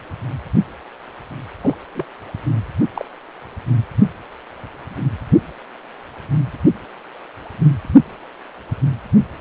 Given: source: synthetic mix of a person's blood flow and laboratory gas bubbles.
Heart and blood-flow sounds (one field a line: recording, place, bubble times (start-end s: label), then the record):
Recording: Doppler ultrasound of blood flow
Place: precordium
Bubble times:
1.61-1.75 s: bubbles
1.95-2.05 s: bubbles
2.94-3.05 s: bubbles
From the record:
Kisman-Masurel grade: 121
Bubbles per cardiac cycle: 1 to 2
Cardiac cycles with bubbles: 10 to 50%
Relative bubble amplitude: barely perceptible (0.100 to 0.250)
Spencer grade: 2 (many but less than half of the cardiac periods contain bubble signals, singularly or in groups)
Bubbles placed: anywhere in the cardiac cycle